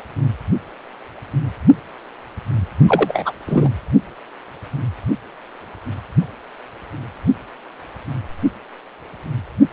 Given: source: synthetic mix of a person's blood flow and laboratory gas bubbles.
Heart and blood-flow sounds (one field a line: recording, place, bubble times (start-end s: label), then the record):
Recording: Doppler ultrasound of blood flow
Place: precordium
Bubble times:
2.88-3.33 s: bubbles
3.46-3.70 s: bubbles
From the record:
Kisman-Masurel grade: 213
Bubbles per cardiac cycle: several, 3 to 8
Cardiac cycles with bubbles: 1 to 10%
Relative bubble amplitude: loud (0.450 to 0.775)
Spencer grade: 1 (occasional bubble signal discernible with the cardiac motion signal, with majority of cardiac periods free of bubbles)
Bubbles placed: anywhere in the cardiac cycle